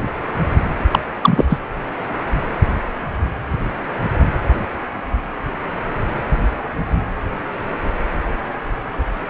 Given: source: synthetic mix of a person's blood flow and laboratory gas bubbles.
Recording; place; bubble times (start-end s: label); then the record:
Doppler ultrasound of blood flow; precordium
0.91-0.99 s: bubbles
1.22-1.45 s: bubbles
1.49-1.58 s: bubbles
From the record:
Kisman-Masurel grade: 223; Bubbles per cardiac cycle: several, 3 to 8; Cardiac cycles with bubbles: 10 to 50%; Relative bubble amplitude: loud (0.450 to 0.775); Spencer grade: 2 (many but less than half of the cardiac periods contain bubble signals, singularly or in groups); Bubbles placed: anywhere in the cardiac cycle